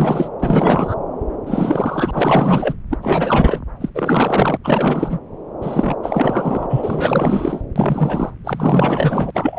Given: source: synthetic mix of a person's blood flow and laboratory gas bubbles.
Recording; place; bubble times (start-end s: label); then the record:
Doppler ultrasound of blood flow; subclavian vein
0.00-0.28 s: bubbles
0.40-0.95 s: bubbles
1.46-2.75 s: bubbles
2.90-2.98 s: bubbles
3.02-3.59 s: bubbles
3.80-3.90 s: bubbles
3.94-4.57 s: bubbles
4.64-5.19 s: bubbles
5.61-5.96 s: bubbles
6.03-6.67 s: bubbles
6.70-7.62 s: bubbles
7.75-8.30 s: bubbles
8.43-9.30 s: bubbles
9.34-9.58 s: bubbles
From the record:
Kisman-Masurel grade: 444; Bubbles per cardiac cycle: continuous sound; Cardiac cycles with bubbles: 100%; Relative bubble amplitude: maximal (0.775 to 0.999); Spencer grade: 4 (maximum detectable bubble signal sounding continuously throughout systole and diastole of every cardiac period, and overriding the amplitude of the normal cardiac signals); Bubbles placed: anywhere in the cardiac cycle